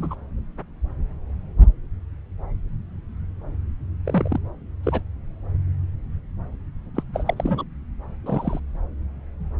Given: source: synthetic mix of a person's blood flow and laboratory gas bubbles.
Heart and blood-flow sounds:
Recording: Doppler ultrasound of blood flow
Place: subclavian vein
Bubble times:
0.00-0.15 s: bubbles
4.06-4.39 s: bubbles
4.83-5.01 s: bubbles
6.95-7.03 s: bubbles
7.14-7.34 s: bubbles
7.37-7.64 s: bubbles
8.25-8.59 s: bubbles
From the record:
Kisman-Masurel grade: 222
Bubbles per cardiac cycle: several, 3 to 8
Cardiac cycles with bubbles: 10 to 50%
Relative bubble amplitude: moderate (0.250 to 0.450)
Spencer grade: 2 (many but less than half of the cardiac periods contain bubble signals, singularly or in groups)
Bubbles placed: anywhere in the cardiac cycle

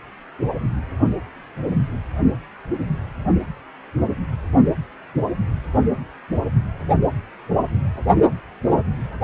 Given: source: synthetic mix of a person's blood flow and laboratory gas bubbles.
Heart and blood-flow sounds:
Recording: Doppler ultrasound of blood flow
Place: precordium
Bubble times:
no bubbles
From the record:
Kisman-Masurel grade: 000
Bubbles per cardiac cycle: 0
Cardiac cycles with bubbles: 0%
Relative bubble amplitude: no bubbles discernible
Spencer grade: 0 (complete lack of bubble signals)

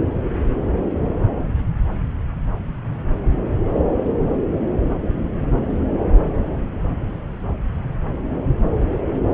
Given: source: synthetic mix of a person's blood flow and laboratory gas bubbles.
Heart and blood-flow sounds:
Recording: Doppler ultrasound of blood flow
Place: subclavian vein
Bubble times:
no bubbles
From the record:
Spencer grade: 0 (complete lack of bubble signals)

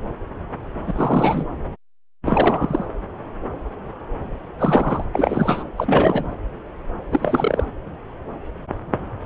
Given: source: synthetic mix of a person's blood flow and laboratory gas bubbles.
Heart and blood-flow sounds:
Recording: Doppler ultrasound of blood flow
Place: subclavian vein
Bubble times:
0.87-1.45 s: bubbles
2.24-2.86 s: bubbles
4.59-5.04 s: bubbles
5.12-5.67 s: bubbles
5.77-6.37 s: bubbles
7.11-7.66 s: bubbles
From the record:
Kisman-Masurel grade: 332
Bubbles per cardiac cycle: rolling drumbeat, 9 or more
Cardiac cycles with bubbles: 50 to 99%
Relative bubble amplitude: moderate (0.250 to 0.450)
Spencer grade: 3 (all of the cardiac periods contain showers or single bubble signals, but not dominating or overriding the cardiac motion signals)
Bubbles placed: anywhere in the cardiac cycle

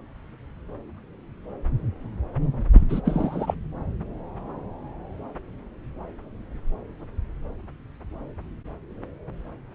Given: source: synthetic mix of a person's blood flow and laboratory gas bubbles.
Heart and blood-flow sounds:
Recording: Doppler ultrasound of blood flow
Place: subclavian vein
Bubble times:
2.73-2.87 s: bubbles
2.89-3.01 s: bubbles
3.05-3.55 s: bubbles
From the record:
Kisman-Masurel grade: 212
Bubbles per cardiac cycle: several, 3 to 8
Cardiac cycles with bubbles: 1 to 10%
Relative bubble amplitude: moderate (0.250 to 0.450)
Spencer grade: 1 (occasional bubble signal discernible with the cardiac motion signal, with majority of cardiac periods free of bubbles)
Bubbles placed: anywhere in the cardiac cycle

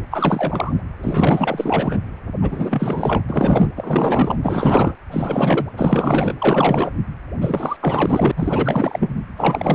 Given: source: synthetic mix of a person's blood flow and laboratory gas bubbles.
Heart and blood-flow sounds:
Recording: Doppler ultrasound of blood flow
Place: precordium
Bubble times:
0.11-0.72 s: bubbles
1.02-1.98 s: bubbles
2.41-3.22 s: bubbles
3.29-3.68 s: bubbles
3.76-4.36 s: bubbles
4.42-4.92 s: bubbles
5.12-5.67 s: bubbles
5.77-6.34 s: bubbles
6.40-6.92 s: bubbles
7.41-7.76 s: bubbles
7.80-8.31 s: bubbles
8.36-9.25 s: bubbles
9.36-9.75 s: bubbles
From the record:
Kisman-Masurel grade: 444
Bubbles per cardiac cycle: continuous sound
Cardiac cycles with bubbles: 100%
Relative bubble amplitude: maximal (0.775 to 0.999)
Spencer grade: 4 (maximum detectable bubble signal sounding continuously throughout systole and diastole of every cardiac period, and overriding the amplitude of the normal cardiac signals)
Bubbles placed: anywhere in the cardiac cycle

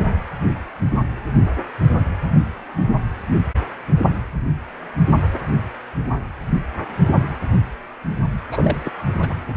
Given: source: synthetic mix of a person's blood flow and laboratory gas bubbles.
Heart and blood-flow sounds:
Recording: Doppler ultrasound of blood flow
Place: precordium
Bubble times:
8.51-8.77 s: bubbles
8.85-8.90 s: bubbles
9.22-9.40 s: bubbles
From the record:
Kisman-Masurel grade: 222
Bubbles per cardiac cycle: several, 3 to 8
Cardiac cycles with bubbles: 10 to 50%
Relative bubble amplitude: moderate (0.250 to 0.450)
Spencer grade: 2 (many but less than half of the cardiac periods contain bubble signals, singularly or in groups)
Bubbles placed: only in the low amplitude regions of the cardiac cycle

